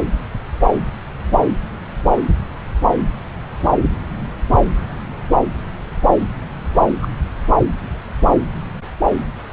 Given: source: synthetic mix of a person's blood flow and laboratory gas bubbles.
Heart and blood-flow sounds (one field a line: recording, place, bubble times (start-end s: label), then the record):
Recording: Doppler ultrasound of blood flow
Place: subclavian vein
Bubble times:
7.01-7.07 s: bubbles
From the record:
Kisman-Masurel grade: 113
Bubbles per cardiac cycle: 1 to 2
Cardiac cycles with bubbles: 1 to 10%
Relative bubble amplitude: loud (0.450 to 0.775)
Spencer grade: 1 (occasional bubble signal discernible with the cardiac motion signal, with majority of cardiac periods free of bubbles)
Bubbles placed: anywhere in the cardiac cycle